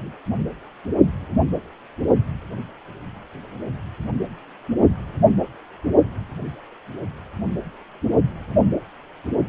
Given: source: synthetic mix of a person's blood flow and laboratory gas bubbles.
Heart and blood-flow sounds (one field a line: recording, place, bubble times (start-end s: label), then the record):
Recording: Doppler ultrasound of blood flow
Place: precordium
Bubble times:
no bubbles
From the record:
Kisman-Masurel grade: 000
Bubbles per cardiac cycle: 0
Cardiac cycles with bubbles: 0%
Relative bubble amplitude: no bubbles discernible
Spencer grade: 0 (complete lack of bubble signals)